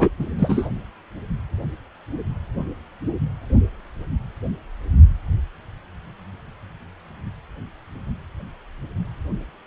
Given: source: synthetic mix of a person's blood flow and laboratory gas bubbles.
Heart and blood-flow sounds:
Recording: Doppler ultrasound of blood flow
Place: precordium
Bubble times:
0.00-0.10 s: bubbles
0.20-0.26 s: bubbles
0.39-0.68 s: bubbles
From the record:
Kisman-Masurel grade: 213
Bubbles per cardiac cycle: several, 3 to 8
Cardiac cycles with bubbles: 1 to 10%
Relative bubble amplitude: loud (0.450 to 0.775)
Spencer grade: 1 (occasional bubble signal discernible with the cardiac motion signal, with majority of cardiac periods free of bubbles)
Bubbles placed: anywhere in the cardiac cycle

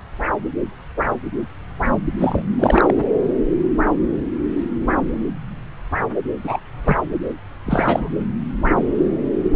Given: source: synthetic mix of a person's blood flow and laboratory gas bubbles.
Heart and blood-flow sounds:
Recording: Doppler ultrasound of blood flow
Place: subclavian vein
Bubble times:
2.19-2.44 s: bubbles
2.59-2.94 s: bubbles
2.98-3.04 s: bubbles
6.44-6.61 s: bubbles
6.84-6.97 s: bubbles
7.65-8.09 s: bubbles
From the record:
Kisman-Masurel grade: 223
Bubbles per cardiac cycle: several, 3 to 8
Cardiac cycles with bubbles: 10 to 50%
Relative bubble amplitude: loud (0.450 to 0.775)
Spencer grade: 2 (many but less than half of the cardiac periods contain bubble signals, singularly or in groups)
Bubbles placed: anywhere in the cardiac cycle

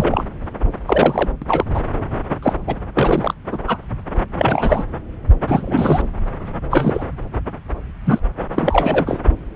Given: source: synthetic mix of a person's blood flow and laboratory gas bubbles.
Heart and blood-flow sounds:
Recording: Doppler ultrasound of blood flow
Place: subclavian vein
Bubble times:
0.00-0.24 s: bubbles
0.87-1.29 s: bubbles
1.42-1.45 s: bubbles
1.48-1.64 s: bubbles
1.74-1.81 s: bubbles
2.42-2.53 s: bubbles
2.67-2.75 s: bubbles
2.95-3.34 s: bubbles
3.52-3.59 s: bubbles
3.67-3.78 s: bubbles
4.38-4.83 s: bubbles
5.47-6.02 s: bubbles
6.71-7.05 s: bubbles
8.04-8.20 s: bubbles
8.56-9.20 s: bubbles
From the record:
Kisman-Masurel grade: 233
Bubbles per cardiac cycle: several, 3 to 8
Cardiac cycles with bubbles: 50 to 99%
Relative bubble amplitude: loud (0.450 to 0.775)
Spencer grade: 3 (all of the cardiac periods contain showers or single bubble signals, but not dominating or overriding the cardiac motion signals)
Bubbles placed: anywhere in the cardiac cycle

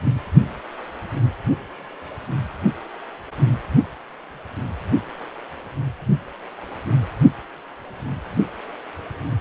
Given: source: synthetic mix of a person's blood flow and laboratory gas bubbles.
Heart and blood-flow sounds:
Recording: Doppler ultrasound of blood flow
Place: precordium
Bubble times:
0.04-0.12 s: bubbles
From the record:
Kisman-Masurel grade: 211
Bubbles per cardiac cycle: several, 3 to 8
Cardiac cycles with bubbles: 1 to 10%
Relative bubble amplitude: barely perceptible (0.100 to 0.250)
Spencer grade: 1 (occasional bubble signal discernible with the cardiac motion signal, with majority of cardiac periods free of bubbles)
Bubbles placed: only in the low amplitude regions of the cardiac cycle

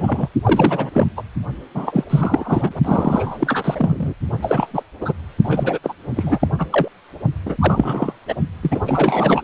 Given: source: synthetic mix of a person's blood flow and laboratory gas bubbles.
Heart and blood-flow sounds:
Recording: Doppler ultrasound of blood flow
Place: precordium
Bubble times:
0.00-0.28 s: bubbles
0.43-0.90 s: bubbles
0.93-1.07 s: bubbles
1.17-1.23 s: bubbles
1.74-2.04 s: bubbles
2.10-2.73 s: bubbles
2.85-4.13 s: bubbles
4.42-4.83 s: bubbles
5.00-5.13 s: bubbles
5.43-5.78 s: bubbles
5.83-5.93 s: bubbles
6.08-6.47 s: bubbles
6.58-6.67 s: bubbles
6.70-6.88 s: bubbles
7.45-8.13 s: bubbles
8.28-8.35 s: bubbles
8.62-9.42 s: bubbles
From the record:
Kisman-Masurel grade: 343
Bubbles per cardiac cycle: rolling drumbeat, 9 or more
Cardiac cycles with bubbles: 100%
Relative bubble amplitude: loud (0.450 to 0.775)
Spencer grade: 3 (all of the cardiac periods contain showers or single bubble signals, but not dominating or overriding the cardiac motion signals)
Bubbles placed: only in the low amplitude regions of the cardiac cycle

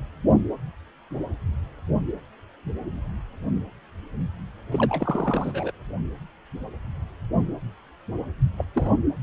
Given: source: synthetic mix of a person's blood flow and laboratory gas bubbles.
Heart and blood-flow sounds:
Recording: Doppler ultrasound of blood flow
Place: precordium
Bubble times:
4.71-5.71 s: bubbles
8.58-8.64 s: bubbles
8.76-8.96 s: bubbles
From the record:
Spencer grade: 2 (many but less than half of the cardiac periods contain bubble signals, singularly or in groups)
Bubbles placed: anywhere in the cardiac cycle

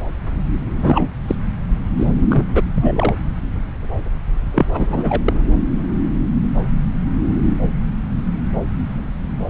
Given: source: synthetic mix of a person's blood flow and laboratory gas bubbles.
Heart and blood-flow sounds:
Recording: Doppler ultrasound of blood flow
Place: subclavian vein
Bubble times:
0.81-1.09 s: bubbles
1.28-1.36 s: bubbles
1.97-2.12 s: bubbles
2.29-2.44 s: bubbles
2.52-2.63 s: bubbles
2.74-3.14 s: bubbles
4.54-4.66 s: bubbles
4.72-5.21 s: bubbles
5.26-5.42 s: bubbles
From the record:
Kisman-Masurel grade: 223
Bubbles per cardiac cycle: several, 3 to 8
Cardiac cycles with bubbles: 10 to 50%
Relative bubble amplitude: loud (0.450 to 0.775)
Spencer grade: 2 (many but less than half of the cardiac periods contain bubble signals, singularly or in groups)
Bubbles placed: anywhere in the cardiac cycle

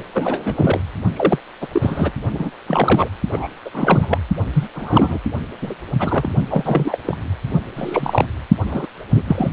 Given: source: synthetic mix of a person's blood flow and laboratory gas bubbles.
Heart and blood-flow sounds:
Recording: Doppler ultrasound of blood flow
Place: precordium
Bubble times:
0.14-0.80 s: bubbles
1.16-1.39 s: bubbles
1.61-1.67 s: bubbles
1.72-2.12 s: bubbles
2.31-2.51 s: bubbles
2.67-3.08 s: bubbles
3.31-3.47 s: bubbles
3.65-3.69 s: bubbles
3.73-4.18 s: bubbles
4.53-4.67 s: bubbles
4.75-5.18 s: bubbles
5.61-5.75 s: bubbles
5.99-6.30 s: bubbles
6.49-6.98 s: bubbles
7.06-7.17 s: bubbles
7.76-8.25 s: bubbles
8.65-8.87 s: bubbles
9.14-9.22 s: bubbles
9.28-9.49 s: bubbles
From the record:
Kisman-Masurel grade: 242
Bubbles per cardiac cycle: several, 3 to 8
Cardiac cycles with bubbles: 100%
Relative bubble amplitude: moderate (0.250 to 0.450)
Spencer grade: 3 (all of the cardiac periods contain showers or single bubble signals, but not dominating or overriding the cardiac motion signals)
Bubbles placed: only in the low amplitude regions of the cardiac cycle

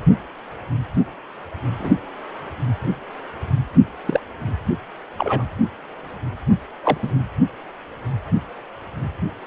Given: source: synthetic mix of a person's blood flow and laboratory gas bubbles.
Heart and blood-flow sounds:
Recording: Doppler ultrasound of blood flow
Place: precordium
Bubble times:
1.78-1.95 s: bubbles
4.06-4.20 s: bubbles
5.17-5.44 s: bubbles
6.83-6.97 s: bubbles
7.02-7.14 s: bubbles
From the record:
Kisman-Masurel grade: 122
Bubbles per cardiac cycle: 1 to 2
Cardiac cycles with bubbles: 10 to 50%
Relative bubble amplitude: moderate (0.250 to 0.450)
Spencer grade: 2 (many but less than half of the cardiac periods contain bubble signals, singularly or in groups)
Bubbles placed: anywhere in the cardiac cycle

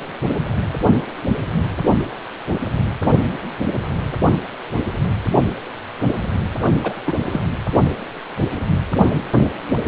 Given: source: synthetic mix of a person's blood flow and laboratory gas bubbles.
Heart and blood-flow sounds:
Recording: Doppler ultrasound of blood flow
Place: precordium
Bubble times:
6.83-6.93 s: bubbles
7.07-7.13 s: bubbles
7.30-7.41 s: bubbles
From the record:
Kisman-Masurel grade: 213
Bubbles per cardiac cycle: several, 3 to 8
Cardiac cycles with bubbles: 1 to 10%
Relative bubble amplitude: loud (0.450 to 0.775)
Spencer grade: 1 (occasional bubble signal discernible with the cardiac motion signal, with majority of cardiac periods free of bubbles)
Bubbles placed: only in the low amplitude regions of the cardiac cycle

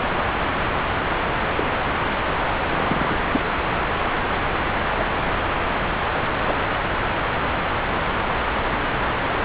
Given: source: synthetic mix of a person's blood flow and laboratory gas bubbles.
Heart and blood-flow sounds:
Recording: Doppler ultrasound of blood flow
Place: subclavian vein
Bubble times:
1.56-1.63 s: bubbles
2.67-3.16 s: bubbles
3.32-3.40 s: bubbles
4.96-5.05 s: bubbles
6.43-6.57 s: bubbles
6.60-6.65 s: bubbles
From the record:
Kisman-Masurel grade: 121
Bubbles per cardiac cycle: 1 to 2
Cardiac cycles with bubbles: 10 to 50%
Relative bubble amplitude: barely perceptible (0.100 to 0.250)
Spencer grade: 2 (many but less than half of the cardiac periods contain bubble signals, singularly or in groups)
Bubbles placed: anywhere in the cardiac cycle

